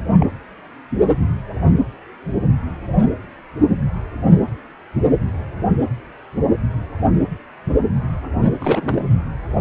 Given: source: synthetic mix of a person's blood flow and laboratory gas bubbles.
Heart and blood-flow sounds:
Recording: Doppler ultrasound of blood flow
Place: precordium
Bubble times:
0.11-0.26 s: bubbles
8.60-9.04 s: bubbles
From the record:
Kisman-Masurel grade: 222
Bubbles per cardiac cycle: several, 3 to 8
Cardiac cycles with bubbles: 10 to 50%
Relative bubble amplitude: moderate (0.250 to 0.450)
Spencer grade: 2 (many but less than half of the cardiac periods contain bubble signals, singularly or in groups)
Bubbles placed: anywhere in the cardiac cycle

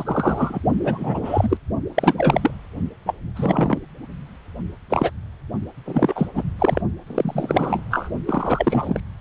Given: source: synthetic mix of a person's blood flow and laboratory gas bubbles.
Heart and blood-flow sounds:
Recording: Doppler ultrasound of blood flow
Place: precordium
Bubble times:
0.00-0.59 s: bubbles
0.84-1.57 s: bubbles
1.94-2.50 s: bubbles
3.06-3.14 s: bubbles
3.35-3.78 s: bubbles
4.90-5.11 s: bubbles
5.85-6.29 s: bubbles
6.35-6.44 s: bubbles
6.58-6.82 s: bubbles
7.07-7.86 s: bubbles
7.91-8.09 s: bubbles
8.25-9.00 s: bubbles
From the record:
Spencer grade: 3 (all of the cardiac periods contain showers or single bubble signals, but not dominating or overriding the cardiac motion signals)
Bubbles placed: only in the low amplitude regions of the cardiac cycle

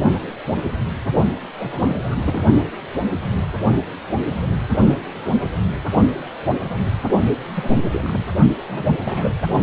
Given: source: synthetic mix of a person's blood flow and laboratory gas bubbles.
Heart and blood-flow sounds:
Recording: Doppler ultrasound of blood flow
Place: precordium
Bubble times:
1.59-2.01 s: bubbles
2.10-2.15 s: bubbles
2.27-2.42 s: bubbles
7.56-7.75 s: bubbles
7.91-8.23 s: bubbles
8.68-8.94 s: bubbles
9.04-9.30 s: bubbles
From the record:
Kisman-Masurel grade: 221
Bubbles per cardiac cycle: several, 3 to 8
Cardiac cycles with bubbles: 10 to 50%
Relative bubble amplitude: barely perceptible (0.100 to 0.250)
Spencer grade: 2 (many but less than half of the cardiac periods contain bubble signals, singularly or in groups)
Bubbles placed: only in the low amplitude regions of the cardiac cycle

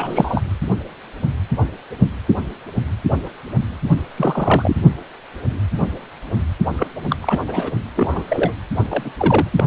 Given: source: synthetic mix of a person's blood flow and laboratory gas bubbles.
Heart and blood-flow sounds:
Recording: Doppler ultrasound of blood flow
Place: precordium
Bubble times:
0.00-0.42 s: bubbles
4.17-4.77 s: bubbles
6.77-6.87 s: bubbles
7.10-7.16 s: bubbles
7.22-7.40 s: bubbles
7.47-7.72 s: bubbles
7.96-8.54 s: bubbles
8.90-9.11 s: bubbles
9.17-9.47 s: bubbles
9.57-9.63 s: bubbles
From the record:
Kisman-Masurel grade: 232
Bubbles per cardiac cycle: several, 3 to 8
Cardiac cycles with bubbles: 50 to 99%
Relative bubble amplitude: moderate (0.250 to 0.450)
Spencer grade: 3 (all of the cardiac periods contain showers or single bubble signals, but not dominating or overriding the cardiac motion signals)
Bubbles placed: anywhere in the cardiac cycle

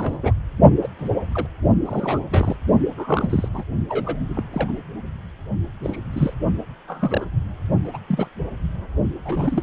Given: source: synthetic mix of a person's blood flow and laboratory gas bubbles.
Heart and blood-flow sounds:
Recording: Doppler ultrasound of blood flow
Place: precordium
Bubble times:
0.00-0.18 s: bubbles
0.22-0.34 s: bubbles
0.82-0.89 s: bubbles
0.98-1.09 s: bubbles
1.31-1.47 s: bubbles
1.85-2.20 s: bubbles
2.31-2.56 s: bubbles
2.97-3.49 s: bubbles
3.53-3.64 s: bubbles
3.88-4.23 s: bubbles
4.28-4.43 s: bubbles
4.53-4.78 s: bubbles
5.83-5.98 s: bubbles
6.12-6.33 s: bubbles
6.88-7.25 s: bubbles
7.83-7.91 s: bubbles
7.93-7.98 s: bubbles
8.08-8.27 s: bubbles
9.25-9.63 s: bubbles
From the record:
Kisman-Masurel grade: 242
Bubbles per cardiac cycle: several, 3 to 8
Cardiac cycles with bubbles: 100%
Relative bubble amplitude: moderate (0.250 to 0.450)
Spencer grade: 3 (all of the cardiac periods contain showers or single bubble signals, but not dominating or overriding the cardiac motion signals)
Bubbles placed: only in the low amplitude regions of the cardiac cycle

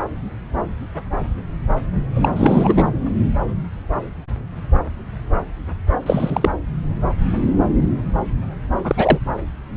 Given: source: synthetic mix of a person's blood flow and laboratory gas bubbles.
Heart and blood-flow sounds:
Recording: Doppler ultrasound of blood flow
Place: subclavian vein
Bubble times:
2.15-2.91 s: bubbles
6.06-6.50 s: bubbles
8.84-9.19 s: bubbles
From the record:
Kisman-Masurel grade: 223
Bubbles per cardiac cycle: several, 3 to 8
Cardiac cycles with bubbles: 10 to 50%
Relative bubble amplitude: loud (0.450 to 0.775)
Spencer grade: 2 (many but less than half of the cardiac periods contain bubble signals, singularly or in groups)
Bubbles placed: anywhere in the cardiac cycle

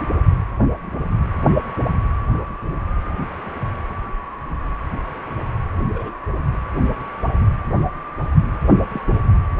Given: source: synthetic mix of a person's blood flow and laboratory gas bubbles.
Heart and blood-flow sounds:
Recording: Doppler ultrasound of blood flow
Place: precordium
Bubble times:
2.29-2.53 s: bubbles
5.94-6.12 s: bubbles
6.53-6.58 s: bubbles
8.64-8.69 s: bubbles
8.92-9.01 s: bubbles
From the record:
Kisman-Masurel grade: 121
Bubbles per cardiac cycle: 1 to 2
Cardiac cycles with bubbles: 10 to 50%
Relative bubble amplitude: barely perceptible (0.100 to 0.250)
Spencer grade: 2 (many but less than half of the cardiac periods contain bubble signals, singularly or in groups)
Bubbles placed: anywhere in the cardiac cycle

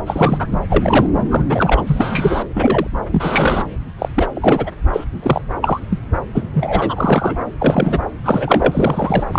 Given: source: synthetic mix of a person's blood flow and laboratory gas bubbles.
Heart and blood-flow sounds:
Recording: Doppler ultrasound of blood flow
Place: subclavian vein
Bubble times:
0.06-0.57 s: bubbles
0.68-1.06 s: bubbles
1.31-1.44 s: bubbles
1.49-2.42 s: bubbles
2.54-2.87 s: bubbles
3.11-3.65 s: bubbles
3.98-4.08 s: bubbles
4.15-4.28 s: bubbles
4.35-4.71 s: bubbles
4.92-5.04 s: bubbles
5.22-5.42 s: bubbles
5.62-5.81 s: bubbles
5.90-6.00 s: bubbles
6.34-6.49 s: bubbles
6.54-7.42 s: bubbles
7.58-7.99 s: bubbles
8.24-9.23 s: bubbles
9.32-9.39 s: bubbles
From the record:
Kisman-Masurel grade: 243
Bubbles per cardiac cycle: several, 3 to 8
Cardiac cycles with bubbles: 100%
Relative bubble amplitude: loud (0.450 to 0.775)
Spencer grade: 3 (all of the cardiac periods contain showers or single bubble signals, but not dominating or overriding the cardiac motion signals)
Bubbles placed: anywhere in the cardiac cycle

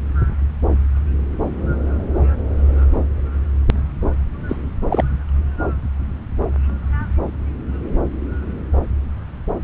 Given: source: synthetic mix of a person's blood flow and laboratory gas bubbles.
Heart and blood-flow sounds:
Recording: Doppler ultrasound of blood flow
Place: subclavian vein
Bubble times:
4.48-4.57 s: bubbles
4.90-5.04 s: bubbles
From the record:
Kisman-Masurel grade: 112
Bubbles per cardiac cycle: 1 to 2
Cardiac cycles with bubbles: 1 to 10%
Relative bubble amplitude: moderate (0.250 to 0.450)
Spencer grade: 1 (occasional bubble signal discernible with the cardiac motion signal, with majority of cardiac periods free of bubbles)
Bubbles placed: anywhere in the cardiac cycle

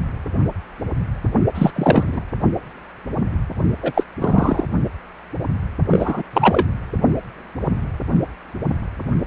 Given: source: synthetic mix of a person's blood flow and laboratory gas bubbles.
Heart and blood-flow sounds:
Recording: Doppler ultrasound of blood flow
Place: precordium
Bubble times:
1.55-1.70 s: bubbles
1.75-2.21 s: bubbles
3.83-4.04 s: bubbles
4.18-4.66 s: bubbles
5.91-6.22 s: bubbles
6.33-6.67 s: bubbles
From the record:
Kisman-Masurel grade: 223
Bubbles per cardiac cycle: several, 3 to 8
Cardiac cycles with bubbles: 10 to 50%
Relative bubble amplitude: loud (0.450 to 0.775)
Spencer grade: 2 (many but less than half of the cardiac periods contain bubble signals, singularly or in groups)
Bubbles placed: only in the low amplitude regions of the cardiac cycle

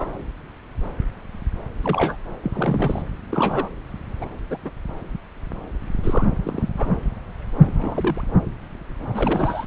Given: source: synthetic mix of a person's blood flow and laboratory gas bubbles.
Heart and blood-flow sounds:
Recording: Doppler ultrasound of blood flow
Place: subclavian vein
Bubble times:
0.00-0.08 s: bubbles
1.82-2.16 s: bubbles
2.43-3.02 s: bubbles
3.31-3.70 s: bubbles
4.21-4.25 s: bubbles
4.50-4.58 s: bubbles
4.65-4.71 s: bubbles
5.96-6.28 s: bubbles
6.45-6.69 s: bubbles
6.77-6.95 s: bubbles
7.64-8.21 s: bubbles
9.13-9.65 s: bubbles
From the record:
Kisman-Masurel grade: 232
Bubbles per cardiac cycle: several, 3 to 8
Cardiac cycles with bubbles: 50 to 99%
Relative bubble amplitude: moderate (0.250 to 0.450)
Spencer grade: 3 (all of the cardiac periods contain showers or single bubble signals, but not dominating or overriding the cardiac motion signals)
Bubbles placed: anywhere in the cardiac cycle

